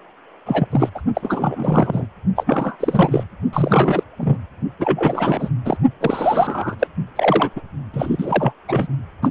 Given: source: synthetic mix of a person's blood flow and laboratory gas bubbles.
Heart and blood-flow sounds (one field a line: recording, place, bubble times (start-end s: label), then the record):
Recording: Doppler ultrasound of blood flow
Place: precordium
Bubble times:
0.46-0.68 s: bubbles
0.71-0.89 s: bubbles
0.94-1.02 s: bubbles
1.15-2.06 s: bubbles
2.36-2.75 s: bubbles
2.79-3.23 s: bubbles
3.52-4.03 s: bubbles
4.17-4.38 s: bubbles
4.78-5.50 s: bubbles
5.65-5.77 s: bubbles
6.00-6.75 s: bubbles
6.78-6.87 s: bubbles
7.15-7.49 s: bubbles
7.55-7.61 s: bubbles
7.92-8.53 s: bubbles
8.68-8.87 s: bubbles
9.22-9.30 s: bubbles
From the record:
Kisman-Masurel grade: 343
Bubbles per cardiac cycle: rolling drumbeat, 9 or more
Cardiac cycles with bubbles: 100%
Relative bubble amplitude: loud (0.450 to 0.775)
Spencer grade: 3 (all of the cardiac periods contain showers or single bubble signals, but not dominating or overriding the cardiac motion signals)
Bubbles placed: only in the low amplitude regions of the cardiac cycle